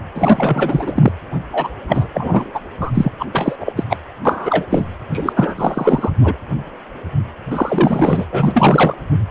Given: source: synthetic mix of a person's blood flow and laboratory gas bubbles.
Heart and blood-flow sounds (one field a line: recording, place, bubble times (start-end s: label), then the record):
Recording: Doppler ultrasound of blood flow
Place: precordium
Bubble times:
0.14-1.10 s: bubbles
1.52-1.70 s: bubbles
1.89-2.06 s: bubbles
2.14-2.51 s: bubbles
2.54-2.60 s: bubbles
2.81-2.92 s: bubbles
2.95-3.12 s: bubbles
3.19-3.25 s: bubbles
3.33-3.56 s: bubbles
3.60-3.73 s: bubbles
3.76-3.84 s: bubbles
3.89-3.96 s: bubbles
4.25-4.66 s: bubbles
4.70-4.85 s: bubbles
5.12-5.33 s: bubbles
5.36-5.54 s: bubbles
5.58-6.10 s: bubbles
6.21-6.37 s: bubbles
7.50-8.25 s: bubbles
8.31-8.95 s: bubbles
From the record:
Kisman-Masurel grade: 333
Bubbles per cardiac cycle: rolling drumbeat, 9 or more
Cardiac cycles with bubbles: 50 to 99%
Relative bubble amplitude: loud (0.450 to 0.775)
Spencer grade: 3 (all of the cardiac periods contain showers or single bubble signals, but not dominating or overriding the cardiac motion signals)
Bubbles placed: anywhere in the cardiac cycle